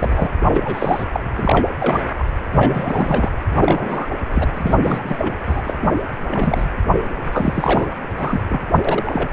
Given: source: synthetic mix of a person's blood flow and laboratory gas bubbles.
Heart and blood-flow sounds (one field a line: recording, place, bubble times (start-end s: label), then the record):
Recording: Doppler ultrasound of blood flow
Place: precordium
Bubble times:
0.00-0.31 s: bubbles
0.45-1.04 s: bubbles
1.12-1.24 s: bubbles
1.32-1.67 s: bubbles
1.80-2.00 s: bubbles
2.18-2.24 s: bubbles
2.52-3.29 s: bubbles
3.54-4.08 s: bubbles
4.32-4.49 s: bubbles
4.54-4.76 s: bubbles
4.83-5.34 s: bubbles
5.46-5.74 s: bubbles
5.82-5.89 s: bubbles
6.30-6.66 s: bubbles
7.32-7.86 s: bubbles
8.16-8.40 s: bubbles
8.48-8.66 s: bubbles
8.85-9.29 s: bubbles
From the record:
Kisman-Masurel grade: 342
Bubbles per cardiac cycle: rolling drumbeat, 9 or more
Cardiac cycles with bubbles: 100%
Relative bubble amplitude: moderate (0.250 to 0.450)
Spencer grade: 3 (all of the cardiac periods contain showers or single bubble signals, but not dominating or overriding the cardiac motion signals)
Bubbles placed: anywhere in the cardiac cycle